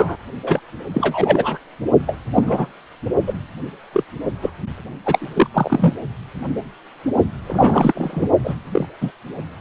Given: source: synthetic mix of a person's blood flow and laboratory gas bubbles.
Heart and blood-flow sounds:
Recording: Doppler ultrasound of blood flow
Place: precordium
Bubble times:
0.00-0.16 s: bubbles
0.43-0.60 s: bubbles
0.93-1.58 s: bubbles
2.06-2.16 s: bubbles
2.34-2.67 s: bubbles
3.27-3.33 s: bubbles
3.93-4.04 s: bubbles
4.42-4.50 s: bubbles
5.05-5.49 s: bubbles
5.54-5.94 s: bubbles
7.45-8.29 s: bubbles
8.44-8.54 s: bubbles
8.71-8.85 s: bubbles
9.01-9.11 s: bubbles
From the record:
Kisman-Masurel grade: 233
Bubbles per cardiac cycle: several, 3 to 8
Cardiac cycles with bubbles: 50 to 99%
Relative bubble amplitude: loud (0.450 to 0.775)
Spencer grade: 3 (all of the cardiac periods contain showers or single bubble signals, but not dominating or overriding the cardiac motion signals)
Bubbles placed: only in the low amplitude regions of the cardiac cycle

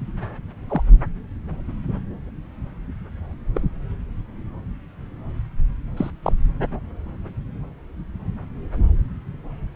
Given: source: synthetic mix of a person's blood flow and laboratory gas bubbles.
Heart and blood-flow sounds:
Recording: Doppler ultrasound of blood flow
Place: subclavian vein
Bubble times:
0.68-0.82 s: bubbles
3.55-3.61 s: bubbles
5.96-6.11 s: bubbles
6.23-6.33 s: bubbles
From the record:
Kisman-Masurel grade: 122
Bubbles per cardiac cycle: 1 to 2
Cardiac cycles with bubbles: 10 to 50%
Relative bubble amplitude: moderate (0.250 to 0.450)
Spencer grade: 2 (many but less than half of the cardiac periods contain bubble signals, singularly or in groups)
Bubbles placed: anywhere in the cardiac cycle

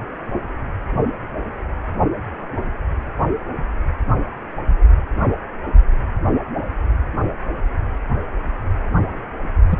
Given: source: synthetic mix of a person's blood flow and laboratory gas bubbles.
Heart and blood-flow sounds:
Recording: Doppler ultrasound of blood flow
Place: precordium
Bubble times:
9.71-9.77 s: bubbles
From the record:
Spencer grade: 1 (occasional bubble signal discernible with the cardiac motion signal, with majority of cardiac periods free of bubbles)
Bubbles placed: only in the low amplitude regions of the cardiac cycle

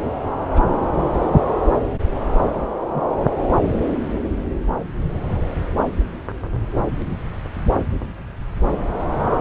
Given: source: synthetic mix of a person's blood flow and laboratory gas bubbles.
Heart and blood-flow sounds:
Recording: Doppler ultrasound of blood flow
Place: subclavian vein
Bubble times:
0.54-0.62 s: bubbles
2.95-3.01 s: bubbles
From the record:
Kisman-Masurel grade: 121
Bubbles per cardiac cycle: 1 to 2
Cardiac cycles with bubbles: 10 to 50%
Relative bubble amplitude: barely perceptible (0.100 to 0.250)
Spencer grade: 2 (many but less than half of the cardiac periods contain bubble signals, singularly or in groups)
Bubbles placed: anywhere in the cardiac cycle

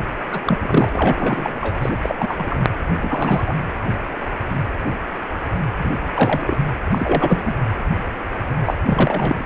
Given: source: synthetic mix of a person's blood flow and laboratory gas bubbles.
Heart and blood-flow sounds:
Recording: Doppler ultrasound of blood flow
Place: precordium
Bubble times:
0.31-0.40 s: bubbles
0.43-0.89 s: bubbles
0.92-1.78 s: bubbles
1.82-1.96 s: bubbles
2.02-2.15 s: bubbles
2.19-2.67 s: bubbles
3.01-3.59 s: bubbles
5.76-5.93 s: bubbles
6.14-6.58 s: bubbles
6.91-7.59 s: bubbles
8.65-8.74 s: bubbles
8.85-9.44 s: bubbles
From the record:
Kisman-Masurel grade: 333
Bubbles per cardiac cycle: rolling drumbeat, 9 or more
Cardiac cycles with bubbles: 50 to 99%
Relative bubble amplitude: loud (0.450 to 0.775)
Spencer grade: 3 (all of the cardiac periods contain showers or single bubble signals, but not dominating or overriding the cardiac motion signals)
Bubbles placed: anywhere in the cardiac cycle

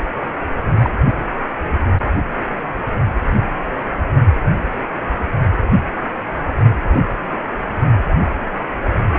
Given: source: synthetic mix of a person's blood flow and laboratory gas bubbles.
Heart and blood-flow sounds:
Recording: Doppler ultrasound of blood flow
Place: precordium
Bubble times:
0.77-0.90 s: bubbles
6.90-7.01 s: bubbles
From the record:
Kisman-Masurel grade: 122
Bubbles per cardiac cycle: 1 to 2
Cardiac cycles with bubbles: 10 to 50%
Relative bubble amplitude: moderate (0.250 to 0.450)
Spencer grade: 2 (many but less than half of the cardiac periods contain bubble signals, singularly or in groups)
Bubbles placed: only in the low amplitude regions of the cardiac cycle

